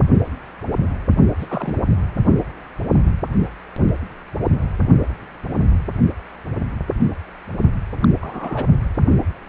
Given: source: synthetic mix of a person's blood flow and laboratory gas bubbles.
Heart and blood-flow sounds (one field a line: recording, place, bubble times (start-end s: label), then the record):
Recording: Doppler ultrasound of blood flow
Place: precordium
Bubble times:
1.39-1.83 s: bubbles
8.00-8.08 s: bubbles
8.21-8.64 s: bubbles
From the record:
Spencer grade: 2 (many but less than half of the cardiac periods contain bubble signals, singularly or in groups)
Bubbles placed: only in the low amplitude regions of the cardiac cycle